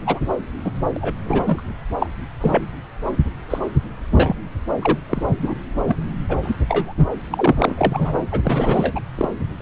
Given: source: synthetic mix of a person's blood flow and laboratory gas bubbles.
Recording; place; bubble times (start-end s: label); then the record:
Doppler ultrasound of blood flow; subclavian vein
0.06-0.19 s: bubbles
0.65-0.72 s: bubbles
0.96-1.15 s: bubbles
1.24-1.67 s: bubbles
2.00-2.10 s: bubbles
2.40-2.71 s: bubbles
3.50-3.59 s: bubbles
4.16-4.35 s: bubbles
4.81-4.98 s: bubbles
5.09-5.25 s: bubbles
5.38-5.55 s: bubbles
5.85-5.96 s: bubbles
6.29-6.37 s: bubbles
6.42-6.56 s: bubbles
6.68-6.94 s: bubbles
6.97-7.08 s: bubbles
7.30-8.12 s: bubbles
8.31-8.40 s: bubbles
8.43-8.99 s: bubbles
9.15-9.29 s: bubbles
9.59-9.62 s: bubbles
From the record:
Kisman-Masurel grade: 242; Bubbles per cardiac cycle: several, 3 to 8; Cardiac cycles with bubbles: 100%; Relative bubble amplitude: moderate (0.250 to 0.450); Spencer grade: 3 (all of the cardiac periods contain showers or single bubble signals, but not dominating or overriding the cardiac motion signals); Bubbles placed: anywhere in the cardiac cycle